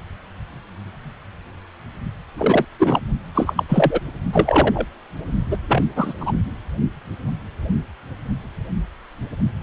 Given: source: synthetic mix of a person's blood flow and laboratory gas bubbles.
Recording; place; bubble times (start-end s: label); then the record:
Doppler ultrasound of blood flow; precordium
2.35-2.65 s: bubbles
2.79-3.00 s: bubbles
3.34-3.54 s: bubbles
3.56-3.63 s: bubbles
3.69-4.00 s: bubbles
4.33-4.86 s: bubbles
5.50-5.57 s: bubbles
5.68-5.83 s: bubbles
5.96-6.14 s: bubbles
6.20-6.32 s: bubbles
9.61-9.63 s: bubbles
From the record:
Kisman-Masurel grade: 223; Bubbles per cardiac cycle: several, 3 to 8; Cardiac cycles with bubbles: 10 to 50%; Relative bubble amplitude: loud (0.450 to 0.775); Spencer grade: 2 (many but less than half of the cardiac periods contain bubble signals, singularly or in groups); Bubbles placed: only in the low amplitude regions of the cardiac cycle